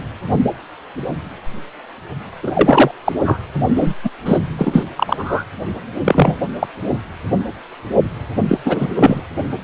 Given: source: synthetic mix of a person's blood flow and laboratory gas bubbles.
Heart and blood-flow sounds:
Doppler ultrasound of blood flow; precordium
2.43-2.91 s: bubbles
3.05-3.12 s: bubbles
3.24-3.38 s: bubbles
3.75-3.94 s: bubbles
4.04-4.10 s: bubbles
4.25-4.38 s: bubbles
4.58-4.85 s: bubbles
4.97-5.44 s: bubbles
6.04-6.39 s: bubbles
6.59-6.67 s: bubbles
8.47-8.58 s: bubbles
8.65-9.22 s: bubbles
From the record:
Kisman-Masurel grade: 223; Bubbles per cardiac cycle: several, 3 to 8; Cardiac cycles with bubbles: 10 to 50%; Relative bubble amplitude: loud (0.450 to 0.775); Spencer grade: 2 (many but less than half of the cardiac periods contain bubble signals, singularly or in groups); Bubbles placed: anywhere in the cardiac cycle

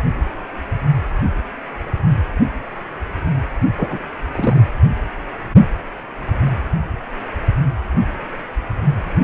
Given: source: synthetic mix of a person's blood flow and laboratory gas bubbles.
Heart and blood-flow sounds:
Doppler ultrasound of blood flow; precordium
3.75-3.99 s: bubbles
4.31-4.68 s: bubbles
From the record:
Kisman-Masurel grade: 212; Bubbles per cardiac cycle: several, 3 to 8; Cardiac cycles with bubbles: 1 to 10%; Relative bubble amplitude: moderate (0.250 to 0.450); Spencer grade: 1 (occasional bubble signal discernible with the cardiac motion signal, with majority of cardiac periods free of bubbles); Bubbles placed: anywhere in the cardiac cycle

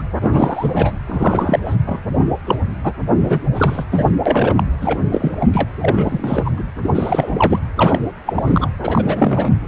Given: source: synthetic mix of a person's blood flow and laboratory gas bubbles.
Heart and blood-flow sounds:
Doppler ultrasound of blood flow; precordium
0.00-0.02 s: bubbles
0.23-0.92 s: bubbles
1.06-1.59 s: bubbles
1.65-1.76 s: bubbles
1.86-1.99 s: bubbles
2.47-2.55 s: bubbles
2.83-2.93 s: bubbles
3.21-3.40 s: bubbles
3.54-3.84 s: bubbles
3.91-4.10 s: bubbles
4.25-4.64 s: bubbles
4.81-5.00 s: bubbles
5.12-5.37 s: bubbles
5.40-5.49 s: bubbles
5.52-5.69 s: bubbles
5.81-6.51 s: bubbles
6.57-6.64 s: bubbles
6.83-6.92 s: bubbles
6.95-7.59 s: bubbles
7.77-8.00 s: bubbles
8.26-8.70 s: bubbles
8.81-9.58 s: bubbles
From the record:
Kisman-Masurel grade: 343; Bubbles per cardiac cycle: rolling drumbeat, 9 or more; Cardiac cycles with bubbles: 100%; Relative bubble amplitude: loud (0.450 to 0.775); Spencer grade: 3 (all of the cardiac periods contain showers or single bubble signals, but not dominating or overriding the cardiac motion signals); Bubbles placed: anywhere in the cardiac cycle

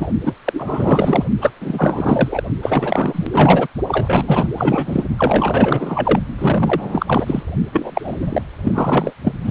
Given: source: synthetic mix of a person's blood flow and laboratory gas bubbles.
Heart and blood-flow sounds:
Doppler ultrasound of blood flow; precordium
0.00-0.08 s: bubbles
0.25-0.33 s: bubbles
0.44-1.24 s: bubbles
1.41-1.51 s: bubbles
1.60-2.43 s: bubbles
2.62-3.67 s: bubbles
3.88-4.47 s: bubbles
4.57-5.04 s: bubbles
5.18-6.20 s: bubbles
6.38-7.42 s: bubbles
7.71-8.42 s: bubbles
8.62-9.12 s: bubbles
9.24-9.37 s: bubbles
9.44-9.51 s: bubbles
From the record:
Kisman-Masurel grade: 444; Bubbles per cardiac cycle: continuous sound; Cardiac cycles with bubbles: 100%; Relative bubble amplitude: maximal (0.775 to 0.999); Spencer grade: 4 (maximum detectable bubble signal sounding continuously throughout systole and diastole of every cardiac period, and overriding the amplitude of the normal cardiac signals); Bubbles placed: only in the low amplitude regions of the cardiac cycle

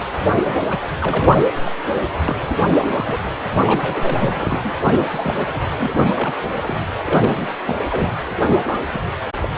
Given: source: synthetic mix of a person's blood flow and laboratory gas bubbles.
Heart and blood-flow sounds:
Doppler ultrasound of blood flow; precordium
0.19-0.36 s: bubbles
0.43-0.55 s: bubbles
0.70-0.78 s: bubbles
1.00-1.43 s: bubbles
1.65-1.76 s: bubbles
2.22-2.58 s: bubbles
2.66-3.18 s: bubbles
3.58-4.78 s: bubbles
4.83-5.07 s: bubbles
5.12-5.59 s: bubbles
5.79-5.93 s: bubbles
5.97-6.34 s: bubbles
6.54-6.85 s: bubbles
7.04-7.48 s: bubbles
7.65-7.79 s: bubbles
7.84-8.09 s: bubbles
8.62-8.80 s: bubbles
8.92-9.03 s: bubbles
9.42-9.48 s: bubbles
From the record:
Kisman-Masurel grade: 342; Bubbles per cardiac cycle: rolling drumbeat, 9 or more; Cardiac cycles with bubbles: 100%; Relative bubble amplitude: moderate (0.250 to 0.450); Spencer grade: 3 (all of the cardiac periods contain showers or single bubble signals, but not dominating or overriding the cardiac motion signals); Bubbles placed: anywhere in the cardiac cycle

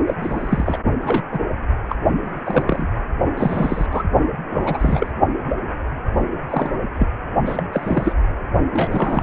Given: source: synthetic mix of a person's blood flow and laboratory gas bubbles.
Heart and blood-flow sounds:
Doppler ultrasound of blood flow; precordium
0.07-0.14 s: bubbles
0.20-0.79 s: bubbles
1.00-1.23 s: bubbles
1.31-1.40 s: bubbles
1.89-1.96 s: bubbles
2.25-2.88 s: bubbles
3.37-3.87 s: bubbles
3.91-4.03 s: bubbles
4.50-5.12 s: bubbles
6.50-6.71 s: bubbles
6.99-7.08 s: bubbles
7.45-7.63 s: bubbles
7.73-8.13 s: bubbles
8.73-9.23 s: bubbles
From the record:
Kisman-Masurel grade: 232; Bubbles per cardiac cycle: several, 3 to 8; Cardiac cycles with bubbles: 50 to 99%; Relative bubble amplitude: moderate (0.250 to 0.450); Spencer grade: 3 (all of the cardiac periods contain showers or single bubble signals, but not dominating or overriding the cardiac motion signals); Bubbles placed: only in the low amplitude regions of the cardiac cycle

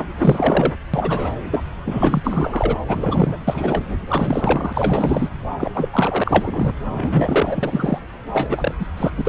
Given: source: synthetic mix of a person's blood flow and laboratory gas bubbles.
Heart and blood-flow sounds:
Doppler ultrasound of blood flow; subclavian vein
0.00-0.02 s: bubbles
0.17-0.74 s: bubbles
0.94-1.31 s: bubbles
1.51-1.64 s: bubbles
1.85-2.20 s: bubbles
2.23-2.78 s: bubbles
2.86-3.36 s: bubbles
3.47-3.95 s: bubbles
4.08-5.29 s: bubbles
5.60-5.70 s: bubbles
5.75-5.89 s: bubbles
5.93-6.72 s: bubbles
6.91-7.98 s: bubbles
8.33-8.75 s: bubbles
8.79-8.85 s: bubbles
8.96-9.11 s: bubbles
9.16-9.21 s: bubbles
9.25-9.29 s: bubbles
From the record:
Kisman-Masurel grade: 332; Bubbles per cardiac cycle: rolling drumbeat, 9 or more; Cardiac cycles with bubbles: 50 to 99%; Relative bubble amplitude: moderate (0.250 to 0.450); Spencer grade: 3 (all of the cardiac periods contain showers or single bubble signals, but not dominating or overriding the cardiac motion signals); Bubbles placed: anywhere in the cardiac cycle

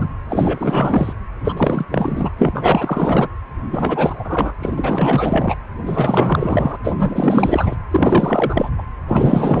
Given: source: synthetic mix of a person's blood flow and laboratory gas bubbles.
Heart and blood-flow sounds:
Doppler ultrasound of blood flow; precordium
0.00-0.08 s: bubbles
0.28-1.13 s: bubbles
1.44-1.85 s: bubbles
1.91-2.31 s: bubbles
2.38-3.28 s: bubbles
3.71-4.53 s: bubbles
4.62-5.56 s: bubbles
5.84-6.78 s: bubbles
6.83-7.76 s: bubbles
7.91-8.69 s: bubbles
8.77-8.83 s: bubbles
9.08-9.60 s: bubbles
From the record:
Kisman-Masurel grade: 444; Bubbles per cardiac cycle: continuous sound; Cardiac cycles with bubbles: 100%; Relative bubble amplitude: maximal (0.775 to 0.999); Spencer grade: 4 (maximum detectable bubble signal sounding continuously throughout systole and diastole of every cardiac period, and overriding the amplitude of the normal cardiac signals); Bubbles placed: anywhere in the cardiac cycle

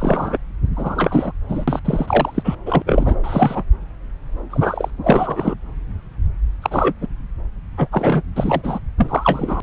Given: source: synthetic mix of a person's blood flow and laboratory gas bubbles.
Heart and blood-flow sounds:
Doppler ultrasound of blood flow; subclavian vein
0.00-0.38 s: bubbles
0.76-1.32 s: bubbles
1.49-1.65 s: bubbles
1.68-1.80 s: bubbles
1.85-2.56 s: bubbles
2.66-2.83 s: bubbles
2.85-3.16 s: bubbles
3.23-3.64 s: bubbles
4.50-4.91 s: bubbles
5.04-5.54 s: bubbles
6.62-6.93 s: bubbles
7.01-7.08 s: bubbles
7.77-7.88 s: bubbles
7.92-8.22 s: bubbles
8.35-8.79 s: bubbles
8.97-9.61 s: bubbles
From the record:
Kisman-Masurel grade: 233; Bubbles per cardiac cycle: several, 3 to 8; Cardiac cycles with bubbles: 50 to 99%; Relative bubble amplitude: loud (0.450 to 0.775); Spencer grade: 3 (all of the cardiac periods contain showers or single bubble signals, but not dominating or overriding the cardiac motion signals); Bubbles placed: anywhere in the cardiac cycle

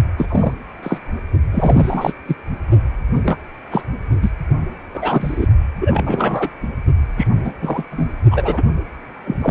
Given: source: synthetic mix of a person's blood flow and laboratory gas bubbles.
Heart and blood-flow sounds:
Doppler ultrasound of blood flow; precordium
0.17-0.26 s: bubbles
0.28-0.53 s: bubbles
0.82-0.97 s: bubbles
1.51-2.13 s: bubbles
2.28-2.35 s: bubbles
3.15-3.21 s: bubbles
3.24-3.38 s: bubbles
3.71-3.84 s: bubbles
4.22-4.29 s: bubbles
4.93-5.47 s: bubbles
5.80-6.49 s: bubbles
6.62-6.67 s: bubbles
7.17-7.27 s: bubbles
7.44-7.52 s: bubbles
7.61-7.83 s: bubbles
7.92-8.08 s: bubbles
8.31-8.63 s: bubbles
9.26-9.51 s: bubbles
From the record:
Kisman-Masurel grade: 243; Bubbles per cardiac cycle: several, 3 to 8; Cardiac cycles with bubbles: 100%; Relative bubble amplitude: loud (0.450 to 0.775); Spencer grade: 3 (all of the cardiac periods contain showers or single bubble signals, but not dominating or overriding the cardiac motion signals); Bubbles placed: only in the low amplitude regions of the cardiac cycle

